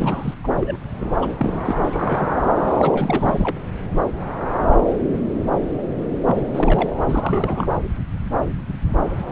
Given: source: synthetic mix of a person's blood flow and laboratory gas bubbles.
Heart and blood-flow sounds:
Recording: Doppler ultrasound of blood flow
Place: subclavian vein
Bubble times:
0.00-0.34 s: bubbles
0.44-0.48 s: bubbles
0.59-0.77 s: bubbles
1.00-1.10 s: bubbles
1.20-1.31 s: bubbles
1.38-2.37 s: bubbles
2.78-3.58 s: bubbles
6.25-6.89 s: bubbles
7.08-7.80 s: bubbles
9.17-9.24 s: bubbles
9.28-9.32 s: bubbles
From the record:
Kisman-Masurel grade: 332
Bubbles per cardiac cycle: rolling drumbeat, 9 or more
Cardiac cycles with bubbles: 50 to 99%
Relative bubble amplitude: moderate (0.250 to 0.450)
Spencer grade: 3 (all of the cardiac periods contain showers or single bubble signals, but not dominating or overriding the cardiac motion signals)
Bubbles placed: anywhere in the cardiac cycle

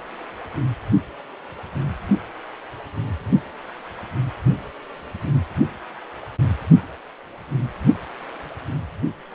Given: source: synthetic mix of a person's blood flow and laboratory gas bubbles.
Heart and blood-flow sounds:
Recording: Doppler ultrasound of blood flow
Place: precordium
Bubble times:
no bubbles
From the record:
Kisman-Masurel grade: 000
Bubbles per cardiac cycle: 0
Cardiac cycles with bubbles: 0%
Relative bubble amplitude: no bubbles discernible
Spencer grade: 0 (complete lack of bubble signals)

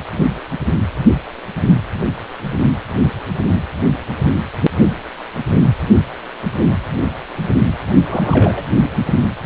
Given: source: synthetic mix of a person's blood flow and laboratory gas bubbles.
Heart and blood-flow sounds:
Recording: Doppler ultrasound of blood flow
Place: precordium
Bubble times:
8.04-8.65 s: bubbles
From the record:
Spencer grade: 1 (occasional bubble signal discernible with the cardiac motion signal, with majority of cardiac periods free of bubbles)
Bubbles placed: anywhere in the cardiac cycle

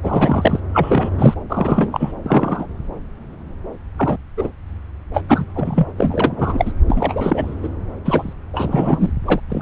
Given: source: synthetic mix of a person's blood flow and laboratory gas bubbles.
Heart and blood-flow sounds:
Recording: Doppler ultrasound of blood flow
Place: subclavian vein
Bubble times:
0.03-0.60 s: bubbles
0.73-1.35 s: bubbles
1.49-2.13 s: bubbles
2.25-2.67 s: bubbles
3.97-4.17 s: bubbles
4.37-4.50 s: bubbles
5.13-5.24 s: bubbles
5.28-5.45 s: bubbles
5.55-5.86 s: bubbles
5.97-6.72 s: bubbles
6.88-7.55 s: bubbles
7.62-7.69 s: bubbles
8.04-8.34 s: bubbles
8.53-9.12 s: bubbles
9.24-9.40 s: bubbles
9.49-9.61 s: bubbles
From the record:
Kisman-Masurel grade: 233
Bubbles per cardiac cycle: several, 3 to 8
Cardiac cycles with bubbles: 50 to 99%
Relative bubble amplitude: loud (0.450 to 0.775)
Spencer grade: 3 (all of the cardiac periods contain showers or single bubble signals, but not dominating or overriding the cardiac motion signals)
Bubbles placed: anywhere in the cardiac cycle

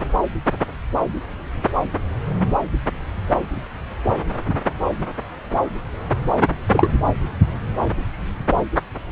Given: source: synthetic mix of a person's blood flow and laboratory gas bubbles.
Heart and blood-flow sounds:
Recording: Doppler ultrasound of blood flow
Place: subclavian vein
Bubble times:
6.69-6.88 s: bubbles
From the record:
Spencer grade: 2 (many but less than half of the cardiac periods contain bubble signals, singularly or in groups)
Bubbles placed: anywhere in the cardiac cycle

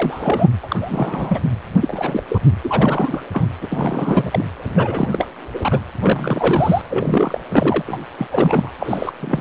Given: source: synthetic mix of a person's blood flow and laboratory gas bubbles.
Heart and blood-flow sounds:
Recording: Doppler ultrasound of blood flow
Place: precordium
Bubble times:
0.00-0.48 s: bubbles
0.62-0.76 s: bubbles
0.80-1.40 s: bubbles
1.81-2.22 s: bubbles
2.29-2.41 s: bubbles
2.64-3.22 s: bubbles
3.33-3.48 s: bubbles
3.61-3.67 s: bubbles
3.70-4.50 s: bubbles
4.75-5.08 s: bubbles
5.12-5.29 s: bubbles
5.54-5.79 s: bubbles
5.97-6.82 s: bubbles
6.90-7.41 s: bubbles
7.49-7.82 s: bubbles
7.87-8.03 s: bubbles
8.18-8.27 s: bubbles
8.29-8.73 s: bubbles
8.79-9.12 s: bubbles
9.21-9.41 s: bubbles
From the record:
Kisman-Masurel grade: 343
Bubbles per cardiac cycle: rolling drumbeat, 9 or more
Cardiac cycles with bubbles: 100%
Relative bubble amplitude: loud (0.450 to 0.775)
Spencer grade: 3 (all of the cardiac periods contain showers or single bubble signals, but not dominating or overriding the cardiac motion signals)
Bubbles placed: anywhere in the cardiac cycle

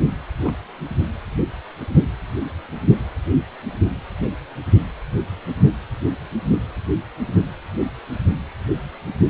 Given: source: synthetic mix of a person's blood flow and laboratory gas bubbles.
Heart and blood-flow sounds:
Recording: Doppler ultrasound of blood flow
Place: precordium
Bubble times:
0.45-0.54 s: bubbles
From the record:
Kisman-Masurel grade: 111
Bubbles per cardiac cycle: 1 to 2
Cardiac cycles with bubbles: 1 to 10%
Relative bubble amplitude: barely perceptible (0.100 to 0.250)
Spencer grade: 1 (occasional bubble signal discernible with the cardiac motion signal, with majority of cardiac periods free of bubbles)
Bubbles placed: anywhere in the cardiac cycle

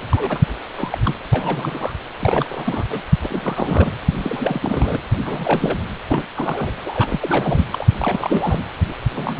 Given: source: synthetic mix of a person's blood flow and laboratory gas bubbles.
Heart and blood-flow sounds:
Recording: Doppler ultrasound of blood flow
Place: precordium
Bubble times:
0.11-0.55 s: bubbles
0.76-0.98 s: bubbles
1.04-1.15 s: bubbles
1.33-1.96 s: bubbles
2.19-2.83 s: bubbles
2.89-3.01 s: bubbles
3.23-3.90 s: bubbles
4.22-4.98 s: bubbles
5.25-5.78 s: bubbles
6.08-6.27 s: bubbles
6.35-6.73 s: bubbles
6.86-7.19 s: bubbles
7.22-7.65 s: bubbles
7.71-7.88 s: bubbles
8.00-8.65 s: bubbles
9.14-9.40 s: bubbles
From the record:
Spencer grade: 3 (all of the cardiac periods contain showers or single bubble signals, but not dominating or overriding the cardiac motion signals)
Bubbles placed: anywhere in the cardiac cycle

